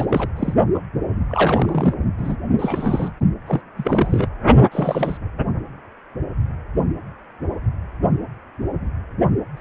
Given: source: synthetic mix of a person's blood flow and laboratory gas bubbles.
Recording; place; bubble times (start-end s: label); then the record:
Doppler ultrasound of blood flow; precordium
0.00-0.05 s: bubbles
0.09-0.32 s: bubbles
0.36-0.53 s: bubbles
0.74-0.78 s: bubbles
1.28-1.94 s: bubbles
2.17-2.37 s: bubbles
2.59-3.12 s: bubbles
3.47-3.61 s: bubbles
3.77-4.29 s: bubbles
4.71-5.17 s: bubbles
9.56-9.61 s: bubbles
From the record:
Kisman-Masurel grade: 232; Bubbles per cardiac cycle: several, 3 to 8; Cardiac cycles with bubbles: 50 to 99%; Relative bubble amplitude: moderate (0.250 to 0.450); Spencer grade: 3 (all of the cardiac periods contain showers or single bubble signals, but not dominating or overriding the cardiac motion signals); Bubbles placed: only in the low amplitude regions of the cardiac cycle